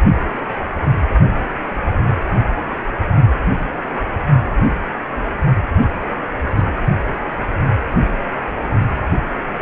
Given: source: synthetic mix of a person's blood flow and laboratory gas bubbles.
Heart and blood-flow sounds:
Doppler ultrasound of blood flow; precordium
6.55-6.63 s: bubbles
From the record:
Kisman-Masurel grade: 121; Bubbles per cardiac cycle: 1 to 2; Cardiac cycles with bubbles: 10 to 50%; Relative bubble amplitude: barely perceptible (0.100 to 0.250); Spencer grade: 2 (many but less than half of the cardiac periods contain bubble signals, singularly or in groups); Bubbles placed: anywhere in the cardiac cycle

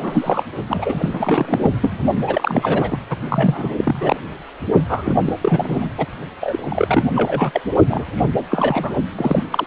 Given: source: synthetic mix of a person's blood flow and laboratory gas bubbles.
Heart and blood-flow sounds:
Doppler ultrasound of blood flow; precordium
0.00-0.44 s: bubbles
0.69-1.71 s: bubbles
1.82-2.00 s: bubbles
2.27-3.00 s: bubbles
3.10-3.17 s: bubbles
3.29-4.16 s: bubbles
4.88-5.14 s: bubbles
5.26-5.33 s: bubbles
5.41-5.89 s: bubbles
5.97-6.06 s: bubbles
6.40-7.11 s: bubbles
7.15-7.61 s: bubbles
7.87-8.11 s: bubbles
8.15-8.22 s: bubbles
8.50-8.95 s: bubbles
9.16-9.43 s: bubbles
9.50-9.67 s: bubbles
From the record:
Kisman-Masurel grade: 343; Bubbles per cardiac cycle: rolling drumbeat, 9 or more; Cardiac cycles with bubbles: 100%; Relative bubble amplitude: loud (0.450 to 0.775); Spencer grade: 3 (all of the cardiac periods contain showers or single bubble signals, but not dominating or overriding the cardiac motion signals); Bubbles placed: only in the low amplitude regions of the cardiac cycle

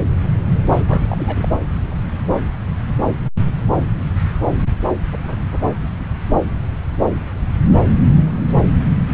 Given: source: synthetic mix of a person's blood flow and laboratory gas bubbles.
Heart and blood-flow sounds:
Doppler ultrasound of blood flow; subclavian vein
0.87-1.48 s: bubbles
From the record:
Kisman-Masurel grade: 211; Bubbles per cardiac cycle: several, 3 to 8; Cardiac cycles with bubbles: 1 to 10%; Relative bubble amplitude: barely perceptible (0.100 to 0.250); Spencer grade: 1 (occasional bubble signal discernible with the cardiac motion signal, with majority of cardiac periods free of bubbles); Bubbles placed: anywhere in the cardiac cycle

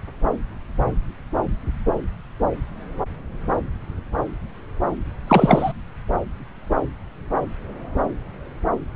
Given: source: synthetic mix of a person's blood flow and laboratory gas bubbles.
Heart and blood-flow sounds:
Doppler ultrasound of blood flow; subclavian vein
5.28-5.72 s: bubbles
From the record:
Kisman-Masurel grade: 213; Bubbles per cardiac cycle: several, 3 to 8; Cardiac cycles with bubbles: 1 to 10%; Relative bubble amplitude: loud (0.450 to 0.775); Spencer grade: 1 (occasional bubble signal discernible with the cardiac motion signal, with majority of cardiac periods free of bubbles); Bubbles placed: anywhere in the cardiac cycle

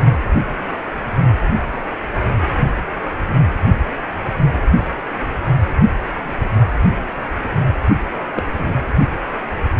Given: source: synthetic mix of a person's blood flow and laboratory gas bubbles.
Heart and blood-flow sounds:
Doppler ultrasound of blood flow; precordium
8.36-8.43 s: bubbles
8.57-8.73 s: bubbles
From the record:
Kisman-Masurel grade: 112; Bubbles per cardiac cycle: 1 to 2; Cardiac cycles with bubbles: 1 to 10%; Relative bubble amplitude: moderate (0.250 to 0.450); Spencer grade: 1 (occasional bubble signal discernible with the cardiac motion signal, with majority of cardiac periods free of bubbles); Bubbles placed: only in the low amplitude regions of the cardiac cycle

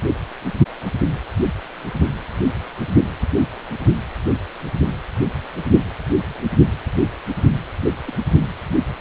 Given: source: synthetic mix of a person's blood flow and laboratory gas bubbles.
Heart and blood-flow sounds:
Doppler ultrasound of blood flow; precordium
8.04-8.12 s: bubbles
From the record:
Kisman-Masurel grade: 121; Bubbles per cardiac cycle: 1 to 2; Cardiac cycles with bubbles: 10 to 50%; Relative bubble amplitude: barely perceptible (0.100 to 0.250); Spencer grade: 2 (many but less than half of the cardiac periods contain bubble signals, singularly or in groups); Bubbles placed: anywhere in the cardiac cycle

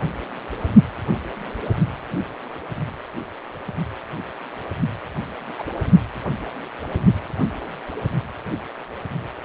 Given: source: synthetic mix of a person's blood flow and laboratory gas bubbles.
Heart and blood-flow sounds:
Doppler ultrasound of blood flow; precordium
5.57-5.62 s: bubbles
From the record:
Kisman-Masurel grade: 122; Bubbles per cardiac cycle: 1 to 2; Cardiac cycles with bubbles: 10 to 50%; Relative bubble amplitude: moderate (0.250 to 0.450); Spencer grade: 2 (many but less than half of the cardiac periods contain bubble signals, singularly or in groups); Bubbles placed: only in the low amplitude regions of the cardiac cycle

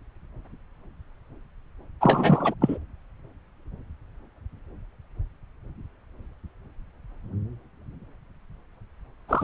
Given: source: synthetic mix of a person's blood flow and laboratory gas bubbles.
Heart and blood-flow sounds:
Doppler ultrasound of blood flow; subclavian vein
2.01-2.54 s: bubbles
2.61-2.78 s: bubbles
9.29-9.44 s: bubbles
From the record:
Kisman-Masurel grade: 222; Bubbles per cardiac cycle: several, 3 to 8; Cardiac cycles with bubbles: 10 to 50%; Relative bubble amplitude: moderate (0.250 to 0.450); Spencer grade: 2 (many but less than half of the cardiac periods contain bubble signals, singularly or in groups); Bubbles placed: anywhere in the cardiac cycle

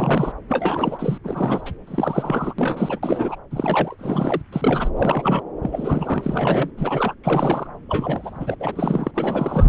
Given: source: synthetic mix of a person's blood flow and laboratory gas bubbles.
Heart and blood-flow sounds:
Doppler ultrasound of blood flow; subclavian vein
0.00-0.32 s: bubbles
0.48-1.18 s: bubbles
1.24-1.71 s: bubbles
1.87-2.53 s: bubbles
2.58-2.99 s: bubbles
3.02-3.35 s: bubbles
3.51-3.96 s: bubbles
3.98-4.42 s: bubbles
4.52-4.89 s: bubbles
4.96-5.42 s: bubbles
5.62-6.70 s: bubbles
6.77-7.14 s: bubbles
7.23-7.67 s: bubbles
7.89-8.55 s: bubbles
8.60-9.11 s: bubbles
9.14-9.65 s: bubbles
From the record:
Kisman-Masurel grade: 342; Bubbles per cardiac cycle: rolling drumbeat, 9 or more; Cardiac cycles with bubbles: 100%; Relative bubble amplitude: moderate (0.250 to 0.450); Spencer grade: 3 (all of the cardiac periods contain showers or single bubble signals, but not dominating or overriding the cardiac motion signals); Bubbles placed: anywhere in the cardiac cycle

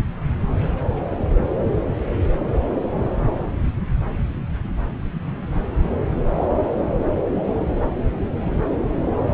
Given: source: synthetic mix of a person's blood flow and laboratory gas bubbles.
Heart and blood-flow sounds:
Doppler ultrasound of blood flow; subclavian vein
no bubbles
From the record:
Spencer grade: 0 (complete lack of bubble signals)

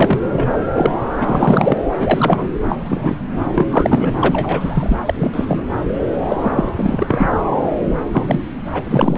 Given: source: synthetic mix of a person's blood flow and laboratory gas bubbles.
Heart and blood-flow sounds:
Doppler ultrasound of blood flow; subclavian vein
0.00-0.23 s: bubbles
0.32-0.50 s: bubbles
0.75-0.94 s: bubbles
1.20-1.77 s: bubbles
1.99-2.50 s: bubbles
2.68-2.75 s: bubbles
2.78-3.16 s: bubbles
3.55-3.68 s: bubbles
3.71-4.12 s: bubbles
4.21-4.97 s: bubbles
5.05-5.64 s: bubbles
6.22-6.36 s: bubbles
6.42-6.52 s: bubbles
6.55-6.69 s: bubbles
6.76-7.29 s: bubbles
8.12-8.44 s: bubbles
8.72-9.18 s: bubbles
From the record:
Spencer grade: 3 (all of the cardiac periods contain showers or single bubble signals, but not dominating or overriding the cardiac motion signals); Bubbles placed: anywhere in the cardiac cycle

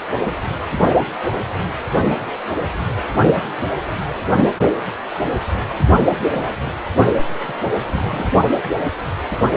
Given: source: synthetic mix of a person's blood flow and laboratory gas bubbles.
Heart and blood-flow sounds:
Doppler ultrasound of blood flow; precordium
6.07-6.54 s: bubbles
6.64-6.71 s: bubbles
7.43-7.53 s: bubbles
7.84-8.30 s: bubbles
From the record:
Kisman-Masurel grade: 221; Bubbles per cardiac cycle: several, 3 to 8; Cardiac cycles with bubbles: 10 to 50%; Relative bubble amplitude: barely perceptible (0.100 to 0.250); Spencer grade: 2 (many but less than half of the cardiac periods contain bubble signals, singularly or in groups); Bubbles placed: only in the low amplitude regions of the cardiac cycle

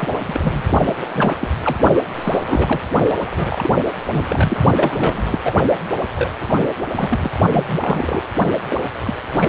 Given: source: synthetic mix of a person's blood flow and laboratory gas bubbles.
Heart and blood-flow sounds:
Doppler ultrasound of blood flow; precordium
0.00-0.20 s: bubbles
0.27-0.62 s: bubbles
0.83-0.95 s: bubbles
1.01-1.06 s: bubbles
1.09-1.48 s: bubbles
1.62-1.79 s: bubbles
2.14-2.81 s: bubbles
3.35-3.71 s: bubbles
4.08-4.64 s: bubbles
4.75-5.39 s: bubbles
5.44-5.65 s: bubbles
6.14-6.31 s: bubbles
6.40-6.67 s: bubbles
6.95-7.31 s: bubbles
7.52-7.64 s: bubbles
7.68-7.78 s: bubbles
7.82-8.22 s: bubbles
8.68-8.76 s: bubbles
9.03-9.13 s: bubbles
9.32-9.48 s: bubbles
From the record:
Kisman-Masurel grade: 342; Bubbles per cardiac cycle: rolling drumbeat, 9 or more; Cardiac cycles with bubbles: 100%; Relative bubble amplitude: moderate (0.250 to 0.450); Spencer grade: 3 (all of the cardiac periods contain showers or single bubble signals, but not dominating or overriding the cardiac motion signals); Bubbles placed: only in the low amplitude regions of the cardiac cycle

